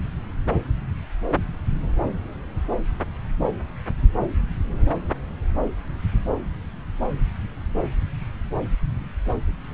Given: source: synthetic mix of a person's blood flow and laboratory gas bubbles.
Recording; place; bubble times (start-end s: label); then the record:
Doppler ultrasound of blood flow; subclavian vein
no bubbles
From the record:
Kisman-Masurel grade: 000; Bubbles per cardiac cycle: 0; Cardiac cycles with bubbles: 0%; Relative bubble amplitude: no bubbles discernible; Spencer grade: 0 (complete lack of bubble signals)